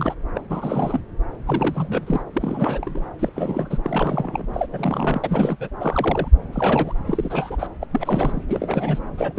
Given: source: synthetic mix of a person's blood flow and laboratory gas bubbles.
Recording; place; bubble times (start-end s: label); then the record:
Doppler ultrasound of blood flow; subclavian vein
0.00-0.14 s: bubbles
0.35-0.41 s: bubbles
0.49-1.00 s: bubbles
1.46-2.23 s: bubbles
2.33-3.08 s: bubbles
3.19-3.31 s: bubbles
3.35-3.78 s: bubbles
3.83-4.47 s: bubbles
4.53-4.67 s: bubbles
4.72-5.57 s: bubbles
5.59-5.70 s: bubbles
5.80-6.28 s: bubbles
6.53-6.93 s: bubbles
7.07-7.67 s: bubbles
7.81-7.87 s: bubbles
7.91-8.42 s: bubbles
8.48-8.99 s: bubbles
9.17-9.32 s: bubbles
9.35-9.39 s: bubbles
From the record:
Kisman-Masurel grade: 342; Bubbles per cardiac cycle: rolling drumbeat, 9 or more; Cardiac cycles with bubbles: 100%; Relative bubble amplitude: moderate (0.250 to 0.450); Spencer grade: 3 (all of the cardiac periods contain showers or single bubble signals, but not dominating or overriding the cardiac motion signals); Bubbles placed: anywhere in the cardiac cycle